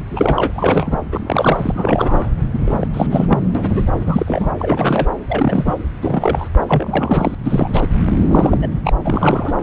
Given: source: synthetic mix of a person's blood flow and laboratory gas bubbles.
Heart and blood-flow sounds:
Doppler ultrasound of blood flow; subclavian vein
0.09-0.51 s: bubbles
0.55-0.98 s: bubbles
1.11-2.29 s: bubbles
2.54-2.89 s: bubbles
2.93-3.07 s: bubbles
3.10-3.50 s: bubbles
3.54-3.84 s: bubbles
4.05-4.50 s: bubbles
4.58-5.08 s: bubbles
5.28-5.75 s: bubbles
6.01-6.49 s: bubbles
6.67-7.35 s: bubbles
7.43-7.98 s: bubbles
8.29-8.58 s: bubbles
8.62-8.68 s: bubbles
8.71-8.81 s: bubbles
8.84-8.94 s: bubbles
9.04-9.53 s: bubbles
From the record:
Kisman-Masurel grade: 342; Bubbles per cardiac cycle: rolling drumbeat, 9 or more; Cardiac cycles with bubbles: 100%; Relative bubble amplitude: moderate (0.250 to 0.450); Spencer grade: 3 (all of the cardiac periods contain showers or single bubble signals, but not dominating or overriding the cardiac motion signals); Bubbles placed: anywhere in the cardiac cycle

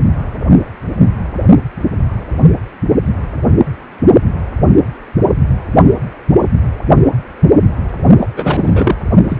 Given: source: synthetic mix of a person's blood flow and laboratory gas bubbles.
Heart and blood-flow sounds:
Doppler ultrasound of blood flow; precordium
8.20-8.30 s: bubbles
8.36-8.96 s: bubbles
9.29-9.39 s: bubbles
From the record:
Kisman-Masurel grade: 213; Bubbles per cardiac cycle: several, 3 to 8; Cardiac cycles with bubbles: 1 to 10%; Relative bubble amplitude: loud (0.450 to 0.775); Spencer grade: 1 (occasional bubble signal discernible with the cardiac motion signal, with majority of cardiac periods free of bubbles); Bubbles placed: only in the low amplitude regions of the cardiac cycle

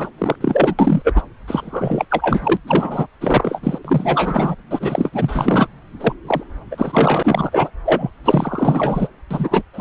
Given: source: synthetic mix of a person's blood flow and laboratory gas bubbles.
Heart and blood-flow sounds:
Doppler ultrasound of blood flow; subclavian vein
0.00-0.10 s: bubbles
0.18-0.36 s: bubbles
0.40-0.75 s: bubbles
0.78-1.22 s: bubbles
1.47-2.05 s: bubbles
2.10-2.57 s: bubbles
2.67-3.07 s: bubbles
3.20-3.78 s: bubbles
3.85-4.55 s: bubbles
4.71-5.67 s: bubbles
6.00-6.12 s: bubbles
6.27-6.44 s: bubbles
6.71-7.71 s: bubbles
7.85-8.11 s: bubbles
8.24-9.08 s: bubbles
9.30-9.62 s: bubbles
9.73-9.81 s: bubbles
From the record:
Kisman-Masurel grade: 444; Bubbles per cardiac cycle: continuous sound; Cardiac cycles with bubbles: 100%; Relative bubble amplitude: maximal (0.775 to 0.999); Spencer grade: 4 (maximum detectable bubble signal sounding continuously throughout systole and diastole of every cardiac period, and overriding the amplitude of the normal cardiac signals); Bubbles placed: anywhere in the cardiac cycle

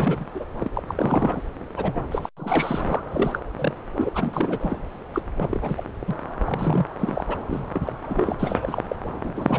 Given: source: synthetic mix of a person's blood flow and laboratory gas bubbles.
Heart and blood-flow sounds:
Doppler ultrasound of blood flow; subclavian vein
0.00-0.26 s: bubbles
0.34-0.45 s: bubbles
0.60-0.68 s: bubbles
0.73-0.83 s: bubbles
0.88-1.41 s: bubbles
1.76-2.04 s: bubbles
2.11-2.29 s: bubbles
2.37-2.82 s: bubbles
2.88-3.02 s: bubbles
3.11-3.38 s: bubbles
3.58-3.75 s: bubbles
3.96-4.09 s: bubbles
4.14-4.77 s: bubbles
5.13-5.22 s: bubbles
5.36-5.85 s: bubbles
6.07-6.15 s: bubbles
6.44-6.86 s: bubbles
6.99-7.24 s: bubbles
7.29-7.35 s: bubbles
7.46-7.64 s: bubbles
7.75-8.36 s: bubbles
8.39-8.82 s: bubbles
8.88-8.96 s: bubbles
9.23-9.59 s: bubbles
From the record:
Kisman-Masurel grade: 342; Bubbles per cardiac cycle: rolling drumbeat, 9 or more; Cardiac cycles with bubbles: 100%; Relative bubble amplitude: moderate (0.250 to 0.450); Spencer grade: 3 (all of the cardiac periods contain showers or single bubble signals, but not dominating or overriding the cardiac motion signals); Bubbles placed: anywhere in the cardiac cycle

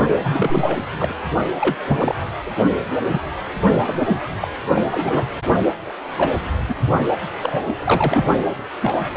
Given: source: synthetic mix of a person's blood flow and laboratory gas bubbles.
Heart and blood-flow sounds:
Doppler ultrasound of blood flow; precordium
0.22-0.90 s: bubbles
0.98-1.13 s: bubbles
1.60-1.75 s: bubbles
1.88-2.14 s: bubbles
2.46-2.50 s: bubbles
2.57-2.63 s: bubbles
3.07-3.21 s: bubbles
3.86-4.22 s: bubbles
4.40-4.47 s: bubbles
4.70-4.82 s: bubbles
4.92-5.31 s: bubbles
5.84-5.93 s: bubbles
6.17-6.32 s: bubbles
6.68-6.75 s: bubbles
7.42-8.27 s: bubbles
8.82-8.92 s: bubbles
9.13-9.17 s: bubbles
From the record:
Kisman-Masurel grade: 232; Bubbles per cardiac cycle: several, 3 to 8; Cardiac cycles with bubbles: 50 to 99%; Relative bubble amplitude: moderate (0.250 to 0.450); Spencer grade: 3 (all of the cardiac periods contain showers or single bubble signals, but not dominating or overriding the cardiac motion signals); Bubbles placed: only in the low amplitude regions of the cardiac cycle

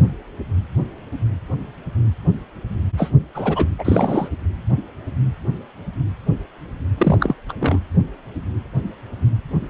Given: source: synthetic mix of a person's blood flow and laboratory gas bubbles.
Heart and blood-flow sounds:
Doppler ultrasound of blood flow; precordium
2.97-3.10 s: bubbles
3.34-3.67 s: bubbles
3.78-4.28 s: bubbles
6.97-7.35 s: bubbles
7.49-7.52 s: bubbles
7.59-7.79 s: bubbles
From the record:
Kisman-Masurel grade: 222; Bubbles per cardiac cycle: several, 3 to 8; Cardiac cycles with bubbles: 10 to 50%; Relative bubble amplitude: moderate (0.250 to 0.450); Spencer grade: 2 (many but less than half of the cardiac periods contain bubble signals, singularly or in groups); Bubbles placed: anywhere in the cardiac cycle

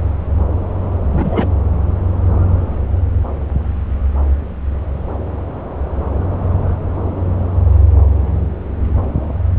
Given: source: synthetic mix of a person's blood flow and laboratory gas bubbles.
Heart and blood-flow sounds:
Doppler ultrasound of blood flow; subclavian vein
1.12-1.48 s: bubbles
From the record:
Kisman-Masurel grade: 212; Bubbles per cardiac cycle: several, 3 to 8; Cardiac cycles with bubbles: 1 to 10%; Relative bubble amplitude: moderate (0.250 to 0.450); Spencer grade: 1 (occasional bubble signal discernible with the cardiac motion signal, with majority of cardiac periods free of bubbles); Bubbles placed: anywhere in the cardiac cycle

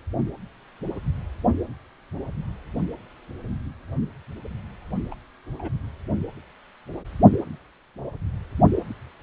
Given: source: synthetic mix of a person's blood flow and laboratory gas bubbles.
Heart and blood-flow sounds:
Doppler ultrasound of blood flow; precordium
5.10-5.14 s: bubbles
5.58-5.69 s: bubbles
From the record:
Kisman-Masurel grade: 111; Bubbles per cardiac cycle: 1 to 2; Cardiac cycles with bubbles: 1 to 10%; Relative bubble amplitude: barely perceptible (0.100 to 0.250); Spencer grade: 1 (occasional bubble signal discernible with the cardiac motion signal, with majority of cardiac periods free of bubbles); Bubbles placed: only in the low amplitude regions of the cardiac cycle

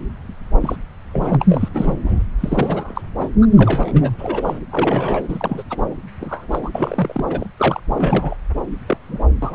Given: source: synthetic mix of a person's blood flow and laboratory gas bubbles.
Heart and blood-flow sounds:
Doppler ultrasound of blood flow; subclavian vein
0.60-0.76 s: bubbles
1.12-1.45 s: bubbles
1.49-1.68 s: bubbles
1.74-2.24 s: bubbles
2.40-3.02 s: bubbles
3.19-3.29 s: bubbles
3.42-3.47 s: bubbles
3.52-4.11 s: bubbles
4.19-4.59 s: bubbles
4.71-5.23 s: bubbles
5.29-5.63 s: bubbles
5.70-5.78 s: bubbles
6.19-6.47 s: bubbles
6.51-6.59 s: bubbles
6.63-6.71 s: bubbles
6.75-7.25 s: bubbles
7.29-7.46 s: bubbles
7.57-7.80 s: bubbles
7.96-8.37 s: bubbles
8.87-8.97 s: bubbles
9.08-9.19 s: bubbles
9.42-9.55 s: bubbles
From the record:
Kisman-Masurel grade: 242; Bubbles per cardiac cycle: several, 3 to 8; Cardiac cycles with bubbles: 100%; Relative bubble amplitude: moderate (0.250 to 0.450); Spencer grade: 3 (all of the cardiac periods contain showers or single bubble signals, but not dominating or overriding the cardiac motion signals); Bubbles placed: anywhere in the cardiac cycle

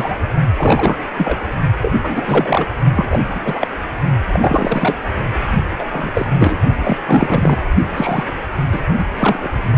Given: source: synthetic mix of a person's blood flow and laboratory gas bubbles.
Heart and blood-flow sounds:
Doppler ultrasound of blood flow; precordium
0.00-0.16 s: bubbles
0.56-1.06 s: bubbles
1.18-1.38 s: bubbles
1.81-1.94 s: bubbles
2.04-2.66 s: bubbles
2.95-3.05 s: bubbles
3.10-3.20 s: bubbles
3.25-3.68 s: bubbles
4.30-4.96 s: bubbles
5.79-5.84 s: bubbles
5.93-6.12 s: bubbles
6.15-6.29 s: bubbles
6.34-6.57 s: bubbles
6.79-6.97 s: bubbles
7.06-7.58 s: bubbles
7.94-8.24 s: bubbles
8.71-8.80 s: bubbles
8.98-9.05 s: bubbles
9.18-9.48 s: bubbles
From the record:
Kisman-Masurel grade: 343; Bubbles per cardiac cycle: rolling drumbeat, 9 or more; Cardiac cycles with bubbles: 100%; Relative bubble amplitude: loud (0.450 to 0.775); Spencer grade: 3 (all of the cardiac periods contain showers or single bubble signals, but not dominating or overriding the cardiac motion signals); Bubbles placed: only in the low amplitude regions of the cardiac cycle

